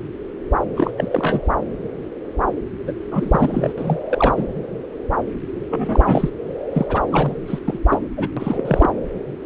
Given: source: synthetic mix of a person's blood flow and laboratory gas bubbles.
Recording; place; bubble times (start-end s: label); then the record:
Doppler ultrasound of blood flow; subclavian vein
0.74-0.90 s: bubbles
0.97-1.08 s: bubbles
1.11-1.41 s: bubbles
2.87-2.92 s: bubbles
3.11-3.73 s: bubbles
3.78-4.00 s: bubbles
4.09-4.45 s: bubbles
5.70-6.29 s: bubbles
6.74-6.86 s: bubbles
6.88-7.02 s: bubbles
7.12-7.36 s: bubbles
7.46-7.59 s: bubbles
7.66-7.79 s: bubbles
7.90-8.02 s: bubbles
8.17-8.28 s: bubbles
8.36-8.91 s: bubbles
From the record:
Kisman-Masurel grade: 332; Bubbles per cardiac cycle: rolling drumbeat, 9 or more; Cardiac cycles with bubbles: 50 to 99%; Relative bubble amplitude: moderate (0.250 to 0.450); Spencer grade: 3 (all of the cardiac periods contain showers or single bubble signals, but not dominating or overriding the cardiac motion signals); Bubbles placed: anywhere in the cardiac cycle